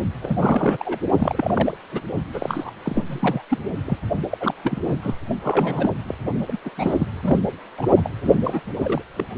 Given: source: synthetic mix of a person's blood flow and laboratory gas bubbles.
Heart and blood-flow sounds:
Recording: Doppler ultrasound of blood flow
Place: precordium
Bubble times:
0.22-0.99 s: bubbles
1.17-1.77 s: bubbles
1.92-2.00 s: bubbles
2.33-2.71 s: bubbles
2.83-3.42 s: bubbles
3.50-3.59 s: bubbles
3.86-3.98 s: bubbles
4.29-4.38 s: bubbles
4.40-4.54 s: bubbles
4.63-4.97 s: bubbles
5.03-5.15 s: bubbles
5.44-5.95 s: bubbles
6.07-6.15 s: bubbles
6.47-6.58 s: bubbles
6.65-6.70 s: bubbles
6.78-7.08 s: bubbles
7.22-7.39 s: bubbles
7.77-7.87 s: bubbles
7.96-8.10 s: bubbles
8.24-8.61 s: bubbles
8.79-9.03 s: bubbles
9.18-9.26 s: bubbles
From the record:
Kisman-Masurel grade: 332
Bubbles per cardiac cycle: rolling drumbeat, 9 or more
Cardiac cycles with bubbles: 50 to 99%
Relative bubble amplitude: moderate (0.250 to 0.450)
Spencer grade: 3 (all of the cardiac periods contain showers or single bubble signals, but not dominating or overriding the cardiac motion signals)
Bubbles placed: only in the low amplitude regions of the cardiac cycle

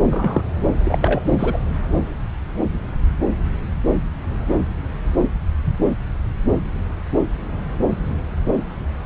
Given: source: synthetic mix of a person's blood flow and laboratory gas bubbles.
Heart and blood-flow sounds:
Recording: Doppler ultrasound of blood flow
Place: subclavian vein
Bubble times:
0.10-0.42 s: bubbles
0.84-1.21 s: bubbles
1.30-1.57 s: bubbles
From the record:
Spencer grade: 1 (occasional bubble signal discernible with the cardiac motion signal, with majority of cardiac periods free of bubbles)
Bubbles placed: anywhere in the cardiac cycle

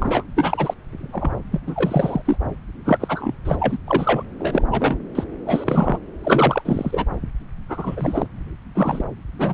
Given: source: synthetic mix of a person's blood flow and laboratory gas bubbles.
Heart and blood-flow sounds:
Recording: Doppler ultrasound of blood flow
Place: subclavian vein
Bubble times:
0.00-0.24 s: bubbles
0.35-0.74 s: bubbles
0.92-1.31 s: bubbles
1.51-1.60 s: bubbles
1.67-2.22 s: bubbles
2.25-2.37 s: bubbles
2.85-3.35 s: bubbles
3.45-3.57 s: bubbles
3.59-3.78 s: bubbles
3.87-4.24 s: bubbles
4.38-4.62 s: bubbles
4.71-4.97 s: bubbles
5.15-5.24 s: bubbles
5.46-5.98 s: bubbles
6.23-6.62 s: bubbles
6.65-7.05 s: bubbles
7.69-8.27 s: bubbles
8.75-9.04 s: bubbles
9.38-9.53 s: bubbles
From the record:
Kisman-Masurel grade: 343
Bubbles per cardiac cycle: rolling drumbeat, 9 or more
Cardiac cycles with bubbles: 100%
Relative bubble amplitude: loud (0.450 to 0.775)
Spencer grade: 3 (all of the cardiac periods contain showers or single bubble signals, but not dominating or overriding the cardiac motion signals)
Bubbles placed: anywhere in the cardiac cycle

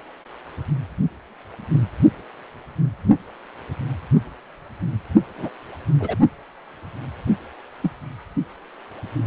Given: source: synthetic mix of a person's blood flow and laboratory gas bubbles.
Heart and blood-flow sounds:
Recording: Doppler ultrasound of blood flow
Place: precordium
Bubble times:
5.38-5.49 s: bubbles
5.99-6.16 s: bubbles
7.82-7.90 s: bubbles
From the record:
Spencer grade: 2 (many but less than half of the cardiac periods contain bubble signals, singularly or in groups)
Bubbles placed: only in the low amplitude regions of the cardiac cycle

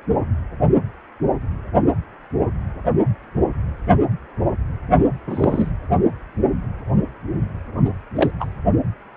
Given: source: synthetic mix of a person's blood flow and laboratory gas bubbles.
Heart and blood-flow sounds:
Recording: Doppler ultrasound of blood flow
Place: precordium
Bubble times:
5.27-5.71 s: bubbles
7.84-7.90 s: bubbles
8.15-8.31 s: bubbles
8.40-8.48 s: bubbles
From the record:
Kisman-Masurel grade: 223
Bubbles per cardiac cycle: several, 3 to 8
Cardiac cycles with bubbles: 10 to 50%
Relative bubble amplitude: loud (0.450 to 0.775)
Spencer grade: 2 (many but less than half of the cardiac periods contain bubble signals, singularly or in groups)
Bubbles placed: only in the low amplitude regions of the cardiac cycle

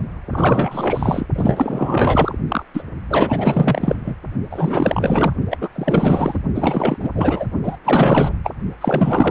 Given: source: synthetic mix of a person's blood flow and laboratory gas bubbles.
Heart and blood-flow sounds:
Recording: Doppler ultrasound of blood flow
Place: precordium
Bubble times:
0.26-1.27 s: bubbles
1.34-2.38 s: bubbles
2.48-2.63 s: bubbles
2.73-2.83 s: bubbles
3.09-4.16 s: bubbles
4.50-5.33 s: bubbles
5.50-5.58 s: bubbles
5.61-5.69 s: bubbles
5.75-6.38 s: bubbles
6.54-7.10 s: bubbles
7.14-7.46 s: bubbles
7.64-7.75 s: bubbles
7.84-8.33 s: bubbles
8.44-8.51 s: bubbles
8.81-9.31 s: bubbles
From the record:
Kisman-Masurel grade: 444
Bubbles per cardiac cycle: continuous sound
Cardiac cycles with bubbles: 100%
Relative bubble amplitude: maximal (0.775 to 0.999)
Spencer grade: 4 (maximum detectable bubble signal sounding continuously throughout systole and diastole of every cardiac period, and overriding the amplitude of the normal cardiac signals)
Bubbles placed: only in the low amplitude regions of the cardiac cycle

